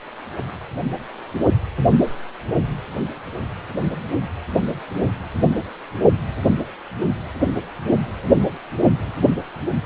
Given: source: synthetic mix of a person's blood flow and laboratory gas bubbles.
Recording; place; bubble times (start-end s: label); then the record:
Doppler ultrasound of blood flow; precordium
no bubbles
From the record:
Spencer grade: 0 (complete lack of bubble signals)